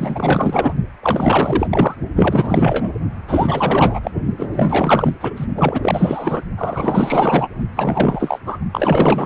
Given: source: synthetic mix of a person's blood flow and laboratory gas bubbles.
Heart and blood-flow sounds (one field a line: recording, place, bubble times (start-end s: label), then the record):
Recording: Doppler ultrasound of blood flow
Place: precordium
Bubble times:
0.00-0.73 s: bubbles
1.02-1.67 s: bubbles
1.70-1.95 s: bubbles
2.16-2.93 s: bubbles
3.28-4.11 s: bubbles
4.38-4.48 s: bubbles
4.51-5.14 s: bubbles
5.21-5.46 s: bubbles
5.55-6.42 s: bubbles
6.58-7.48 s: bubbles
7.75-8.39 s: bubbles
8.46-8.58 s: bubbles
8.72-9.25 s: bubbles
From the record:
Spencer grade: 4 (maximum detectable bubble signal sounding continuously throughout systole and diastole of every cardiac period, and overriding the amplitude of the normal cardiac signals)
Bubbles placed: only in the low amplitude regions of the cardiac cycle